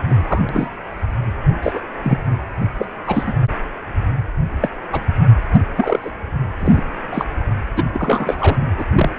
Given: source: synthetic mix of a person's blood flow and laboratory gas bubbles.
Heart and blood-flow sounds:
Doppler ultrasound of blood flow; precordium
0.08-0.44 s: bubbles
0.49-0.67 s: bubbles
1.62-1.84 s: bubbles
2.04-2.20 s: bubbles
2.79-2.85 s: bubbles
3.06-3.23 s: bubbles
3.26-3.33 s: bubbles
4.61-4.69 s: bubbles
4.92-5.00 s: bubbles
5.55-5.60 s: bubbles
5.75-6.11 s: bubbles
6.58-6.82 s: bubbles
7.11-7.25 s: bubbles
7.76-7.83 s: bubbles
7.94-8.57 s: bubbles
8.78-8.84 s: bubbles
8.95-9.09 s: bubbles
From the record:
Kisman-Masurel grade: 242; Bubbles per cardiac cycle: several, 3 to 8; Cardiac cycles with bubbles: 100%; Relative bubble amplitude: moderate (0.250 to 0.450); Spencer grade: 3 (all of the cardiac periods contain showers or single bubble signals, but not dominating or overriding the cardiac motion signals); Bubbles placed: anywhere in the cardiac cycle

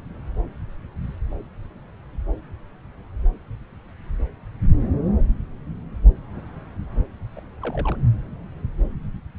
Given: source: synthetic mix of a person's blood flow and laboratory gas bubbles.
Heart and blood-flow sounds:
Doppler ultrasound of blood flow; subclavian vein
7.37-7.40 s: bubbles
7.62-7.96 s: bubbles
From the record:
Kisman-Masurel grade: 111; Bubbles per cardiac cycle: 1 to 2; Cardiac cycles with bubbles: 1 to 10%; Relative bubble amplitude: barely perceptible (0.100 to 0.250); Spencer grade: 1 (occasional bubble signal discernible with the cardiac motion signal, with majority of cardiac periods free of bubbles); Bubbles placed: anywhere in the cardiac cycle

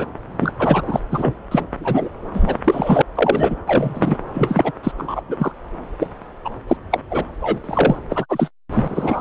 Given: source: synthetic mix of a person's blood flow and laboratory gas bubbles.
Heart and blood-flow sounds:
Doppler ultrasound of blood flow; subclavian vein
0.00-0.06 s: bubbles
0.40-0.52 s: bubbles
0.58-0.82 s: bubbles
0.87-1.00 s: bubbles
1.11-1.35 s: bubbles
1.51-1.66 s: bubbles
1.78-2.09 s: bubbles
2.34-2.58 s: bubbles
2.64-3.02 s: bubbles
3.15-3.56 s: bubbles
3.67-4.17 s: bubbles
4.33-4.72 s: bubbles
4.83-4.92 s: bubbles
4.98-5.22 s: bubbles
5.28-5.35 s: bubbles
5.38-5.52 s: bubbles
5.99-6.09 s: bubbles
6.44-6.50 s: bubbles
6.67-6.77 s: bubbles
6.90-7.00 s: bubbles
7.10-7.24 s: bubbles
7.40-7.59 s: bubbles
7.64-7.97 s: bubbles
8.09-8.25 s: bubbles
8.29-8.49 s: bubbles
8.73-9.21 s: bubbles
From the record:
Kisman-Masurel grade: 243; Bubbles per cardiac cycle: several, 3 to 8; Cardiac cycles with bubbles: 100%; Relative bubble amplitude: loud (0.450 to 0.775); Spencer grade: 3 (all of the cardiac periods contain showers or single bubble signals, but not dominating or overriding the cardiac motion signals); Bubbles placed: anywhere in the cardiac cycle

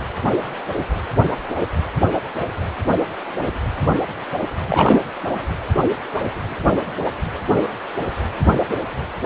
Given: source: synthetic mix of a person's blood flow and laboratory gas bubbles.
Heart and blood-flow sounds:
Doppler ultrasound of blood flow; precordium
4.66-5.00 s: bubbles
From the record:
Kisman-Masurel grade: 222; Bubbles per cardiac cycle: several, 3 to 8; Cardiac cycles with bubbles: 10 to 50%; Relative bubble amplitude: moderate (0.250 to 0.450); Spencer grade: 2 (many but less than half of the cardiac periods contain bubble signals, singularly or in groups); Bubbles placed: anywhere in the cardiac cycle

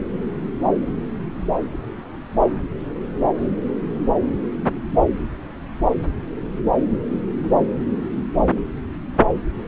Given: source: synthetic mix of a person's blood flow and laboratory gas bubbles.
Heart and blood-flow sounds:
Doppler ultrasound of blood flow; subclavian vein
no bubbles
From the record:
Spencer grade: 0 (complete lack of bubble signals)

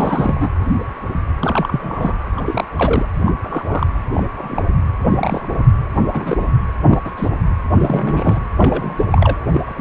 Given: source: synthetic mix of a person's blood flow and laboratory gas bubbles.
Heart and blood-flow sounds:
Doppler ultrasound of blood flow; precordium
0.00-0.51 s: bubbles
1.41-2.18 s: bubbles
2.37-2.65 s: bubbles
2.76-3.06 s: bubbles
3.25-3.32 s: bubbles
3.41-3.87 s: bubbles
4.14-4.23 s: bubbles
4.37-4.62 s: bubbles
5.10-5.58 s: bubbles
6.13-6.44 s: bubbles
6.88-6.99 s: bubbles
7.04-7.11 s: bubbles
7.17-7.31 s: bubbles
7.73-8.39 s: bubbles
8.57-9.04 s: bubbles
9.11-9.37 s: bubbles
9.51-9.62 s: bubbles
9.66-9.81 s: bubbles
From the record:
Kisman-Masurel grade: 232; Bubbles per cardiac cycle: several, 3 to 8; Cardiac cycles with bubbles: 50 to 99%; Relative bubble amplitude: moderate (0.250 to 0.450); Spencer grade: 3 (all of the cardiac periods contain showers or single bubble signals, but not dominating or overriding the cardiac motion signals); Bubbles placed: anywhere in the cardiac cycle

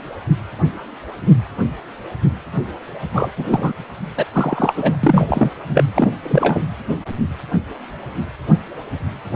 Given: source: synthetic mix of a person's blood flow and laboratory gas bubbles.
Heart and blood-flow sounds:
Doppler ultrasound of blood flow; precordium
3.13-3.31 s: bubbles
3.37-3.73 s: bubbles
4.17-4.25 s: bubbles
4.32-4.97 s: bubbles
5.03-5.50 s: bubbles
5.74-5.84 s: bubbles
5.94-6.08 s: bubbles
6.22-6.62 s: bubbles
From the record:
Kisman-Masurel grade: 223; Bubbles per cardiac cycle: several, 3 to 8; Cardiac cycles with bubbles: 10 to 50%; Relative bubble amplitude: loud (0.450 to 0.775); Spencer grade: 2 (many but less than half of the cardiac periods contain bubble signals, singularly or in groups); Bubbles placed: anywhere in the cardiac cycle

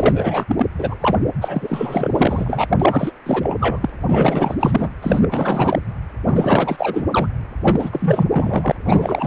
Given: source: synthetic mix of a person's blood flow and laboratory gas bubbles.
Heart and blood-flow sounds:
Doppler ultrasound of blood flow; precordium
0.00-0.45 s: bubbles
0.47-0.67 s: bubbles
0.78-0.96 s: bubbles
1.00-1.17 s: bubbles
1.39-2.66 s: bubbles
2.79-3.12 s: bubbles
3.25-3.79 s: bubbles
3.81-3.89 s: bubbles
4.06-4.56 s: bubbles
4.59-4.89 s: bubbles
5.01-5.79 s: bubbles
6.27-7.31 s: bubbles
7.64-8.27 s: bubbles
8.29-8.72 s: bubbles
8.85-9.27 s: bubbles
From the record:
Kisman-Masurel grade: 444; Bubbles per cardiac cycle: continuous sound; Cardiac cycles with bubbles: 100%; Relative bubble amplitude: maximal (0.775 to 0.999); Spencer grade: 4 (maximum detectable bubble signal sounding continuously throughout systole and diastole of every cardiac period, and overriding the amplitude of the normal cardiac signals); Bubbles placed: anywhere in the cardiac cycle

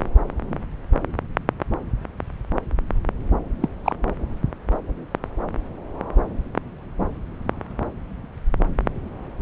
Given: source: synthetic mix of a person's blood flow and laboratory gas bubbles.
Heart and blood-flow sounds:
Doppler ultrasound of blood flow; subclavian vein
3.61-3.69 s: bubbles
3.84-3.95 s: bubbles
From the record:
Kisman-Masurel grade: 112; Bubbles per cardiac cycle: 1 to 2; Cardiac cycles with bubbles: 1 to 10%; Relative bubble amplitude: moderate (0.250 to 0.450); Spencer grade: 1 (occasional bubble signal discernible with the cardiac motion signal, with majority of cardiac periods free of bubbles); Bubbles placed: anywhere in the cardiac cycle

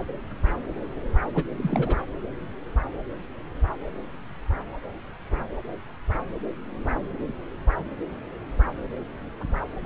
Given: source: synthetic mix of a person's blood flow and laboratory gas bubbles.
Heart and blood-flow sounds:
Doppler ultrasound of blood flow; subclavian vein
1.34-1.45 s: bubbles
1.57-1.97 s: bubbles
9.84-9.86 s: bubbles
From the record:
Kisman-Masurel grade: 211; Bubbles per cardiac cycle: several, 3 to 8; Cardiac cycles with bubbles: 1 to 10%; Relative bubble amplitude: barely perceptible (0.100 to 0.250); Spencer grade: 1 (occasional bubble signal discernible with the cardiac motion signal, with majority of cardiac periods free of bubbles); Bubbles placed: anywhere in the cardiac cycle

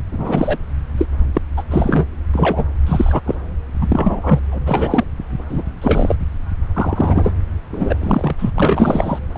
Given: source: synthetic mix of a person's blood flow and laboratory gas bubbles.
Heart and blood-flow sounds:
Doppler ultrasound of blood flow; subclavian vein
0.11-0.58 s: bubbles
0.97-1.06 s: bubbles
1.33-1.41 s: bubbles
1.57-1.63 s: bubbles
1.71-2.06 s: bubbles
2.33-2.65 s: bubbles
2.86-3.22 s: bubbles
3.25-3.35 s: bubbles
3.81-4.40 s: bubbles
4.51-4.58 s: bubbles
4.66-5.04 s: bubbles
5.49-5.62 s: bubbles
5.82-6.15 s: bubbles
6.75-7.31 s: bubbles
7.73-7.96 s: bubbles
8.01-8.35 s: bubbles
8.38-8.51 s: bubbles
8.55-9.19 s: bubbles
9.34-9.38 s: bubbles
From the record:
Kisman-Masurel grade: 243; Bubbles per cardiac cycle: several, 3 to 8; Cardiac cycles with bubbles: 100%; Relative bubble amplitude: loud (0.450 to 0.775); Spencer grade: 3 (all of the cardiac periods contain showers or single bubble signals, but not dominating or overriding the cardiac motion signals); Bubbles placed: anywhere in the cardiac cycle

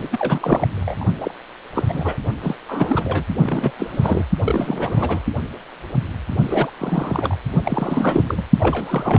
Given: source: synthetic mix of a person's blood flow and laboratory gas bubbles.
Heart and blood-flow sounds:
Doppler ultrasound of blood flow; precordium
0.00-0.08 s: bubbles
0.12-1.04 s: bubbles
1.21-1.31 s: bubbles
1.75-2.19 s: bubbles
2.42-2.55 s: bubbles
2.68-3.24 s: bubbles
3.40-3.71 s: bubbles
3.77-4.25 s: bubbles
4.45-5.23 s: bubbles
6.43-6.71 s: bubbles
6.78-7.36 s: bubbles
7.65-8.42 s: bubbles
8.56-9.19 s: bubbles
From the record:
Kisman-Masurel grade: 332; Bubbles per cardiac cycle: rolling drumbeat, 9 or more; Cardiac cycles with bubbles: 50 to 99%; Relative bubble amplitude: moderate (0.250 to 0.450); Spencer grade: 3 (all of the cardiac periods contain showers or single bubble signals, but not dominating or overriding the cardiac motion signals); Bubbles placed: only in the low amplitude regions of the cardiac cycle

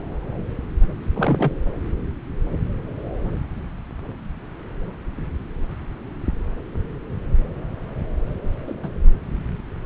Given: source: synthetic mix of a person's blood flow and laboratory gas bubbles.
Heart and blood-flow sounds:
Doppler ultrasound of blood flow; subclavian vein
1.15-1.53 s: bubbles
8.67-8.74 s: bubbles
8.83-8.88 s: bubbles
From the record:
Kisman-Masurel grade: 122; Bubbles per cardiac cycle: 1 to 2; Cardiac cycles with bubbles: 10 to 50%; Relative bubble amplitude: moderate (0.250 to 0.450); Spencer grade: 2 (many but less than half of the cardiac periods contain bubble signals, singularly or in groups); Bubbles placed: anywhere in the cardiac cycle

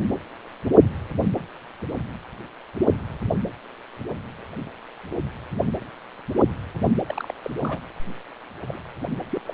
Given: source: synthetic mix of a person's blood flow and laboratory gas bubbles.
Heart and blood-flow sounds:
Doppler ultrasound of blood flow; precordium
7.07-7.31 s: bubbles
7.43-7.50 s: bubbles
7.60-7.78 s: bubbles
8.67-8.82 s: bubbles
9.31-9.41 s: bubbles
9.46-9.54 s: bubbles
From the record:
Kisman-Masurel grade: 221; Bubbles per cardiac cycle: several, 3 to 8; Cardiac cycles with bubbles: 10 to 50%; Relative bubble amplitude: barely perceptible (0.100 to 0.250); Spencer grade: 2 (many but less than half of the cardiac periods contain bubble signals, singularly or in groups); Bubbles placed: anywhere in the cardiac cycle

